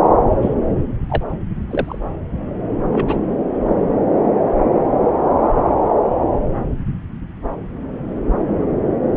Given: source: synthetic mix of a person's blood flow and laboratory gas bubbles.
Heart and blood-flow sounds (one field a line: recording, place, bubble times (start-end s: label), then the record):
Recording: Doppler ultrasound of blood flow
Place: subclavian vein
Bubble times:
0.42-0.55 s: bubbles
1.09-1.23 s: bubbles
1.69-1.98 s: bubbles
2.92-3.17 s: bubbles
9.15-9.17 s: bubbles
From the record:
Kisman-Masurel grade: 122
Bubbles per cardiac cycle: 1 to 2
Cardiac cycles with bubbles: 10 to 50%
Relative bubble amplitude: moderate (0.250 to 0.450)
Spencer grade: 2 (many but less than half of the cardiac periods contain bubble signals, singularly or in groups)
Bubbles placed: anywhere in the cardiac cycle